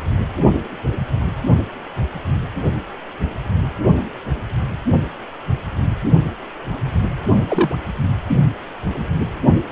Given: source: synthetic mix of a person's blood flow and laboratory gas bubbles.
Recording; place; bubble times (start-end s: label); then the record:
Doppler ultrasound of blood flow; precordium
7.48-7.75 s: bubbles
From the record:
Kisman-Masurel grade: 113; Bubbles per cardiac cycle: 1 to 2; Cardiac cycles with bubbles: 1 to 10%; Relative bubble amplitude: loud (0.450 to 0.775); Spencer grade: 1 (occasional bubble signal discernible with the cardiac motion signal, with majority of cardiac periods free of bubbles); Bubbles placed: only in the low amplitude regions of the cardiac cycle